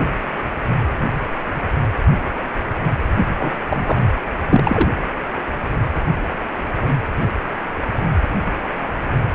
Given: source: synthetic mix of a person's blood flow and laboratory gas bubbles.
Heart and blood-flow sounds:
Doppler ultrasound of blood flow; precordium
3.39-3.51 s: bubbles
3.70-4.04 s: bubbles
4.50-4.89 s: bubbles
From the record:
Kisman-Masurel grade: 213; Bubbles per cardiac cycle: several, 3 to 8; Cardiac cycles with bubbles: 1 to 10%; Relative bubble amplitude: loud (0.450 to 0.775); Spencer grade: 1 (occasional bubble signal discernible with the cardiac motion signal, with majority of cardiac periods free of bubbles); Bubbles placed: anywhere in the cardiac cycle

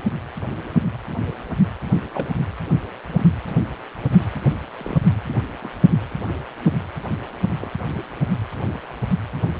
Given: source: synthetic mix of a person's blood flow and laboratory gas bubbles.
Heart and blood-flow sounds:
Doppler ultrasound of blood flow; precordium
2.14-2.28 s: bubbles
3.15-3.29 s: bubbles
4.77-5.00 s: bubbles
5.28-5.38 s: bubbles
5.61-5.70 s: bubbles
7.61-7.71 s: bubbles
7.98-8.03 s: bubbles
From the record:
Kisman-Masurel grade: 121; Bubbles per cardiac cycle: 1 to 2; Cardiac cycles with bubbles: 10 to 50%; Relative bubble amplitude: barely perceptible (0.100 to 0.250); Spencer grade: 2 (many but less than half of the cardiac periods contain bubble signals, singularly or in groups); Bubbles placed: anywhere in the cardiac cycle

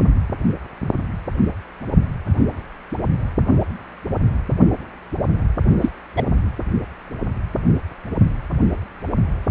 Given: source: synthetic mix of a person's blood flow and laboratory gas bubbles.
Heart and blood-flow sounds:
Doppler ultrasound of blood flow; precordium
5.82-5.91 s: bubbles
6.16-6.23 s: bubbles
From the record:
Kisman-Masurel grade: 113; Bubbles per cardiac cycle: 1 to 2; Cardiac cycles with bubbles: 1 to 10%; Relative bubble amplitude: loud (0.450 to 0.775); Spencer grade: 1 (occasional bubble signal discernible with the cardiac motion signal, with majority of cardiac periods free of bubbles); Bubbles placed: only in the low amplitude regions of the cardiac cycle

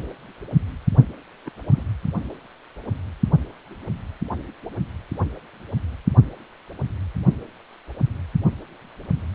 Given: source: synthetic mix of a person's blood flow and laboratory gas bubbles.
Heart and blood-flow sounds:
Doppler ultrasound of blood flow; precordium
1.45-1.51 s: bubbles
1.74-1.83 s: bubbles
From the record:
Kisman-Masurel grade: 111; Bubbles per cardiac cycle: 1 to 2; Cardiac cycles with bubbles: 1 to 10%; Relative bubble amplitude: barely perceptible (0.100 to 0.250); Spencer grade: 1 (occasional bubble signal discernible with the cardiac motion signal, with majority of cardiac periods free of bubbles); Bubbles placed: only in the low amplitude regions of the cardiac cycle

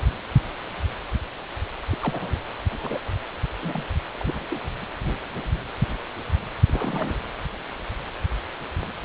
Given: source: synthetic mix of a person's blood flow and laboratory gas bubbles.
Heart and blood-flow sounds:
Doppler ultrasound of blood flow; precordium
1.92-1.98 s: bubbles
2.02-2.38 s: bubbles
2.69-2.98 s: bubbles
3.61-3.85 s: bubbles
4.18-4.46 s: bubbles
4.51-4.56 s: bubbles
6.68-7.16 s: bubbles
From the record:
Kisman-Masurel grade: 221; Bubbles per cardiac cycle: several, 3 to 8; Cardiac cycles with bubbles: 10 to 50%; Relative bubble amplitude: barely perceptible (0.100 to 0.250); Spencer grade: 2 (many but less than half of the cardiac periods contain bubble signals, singularly or in groups); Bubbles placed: anywhere in the cardiac cycle

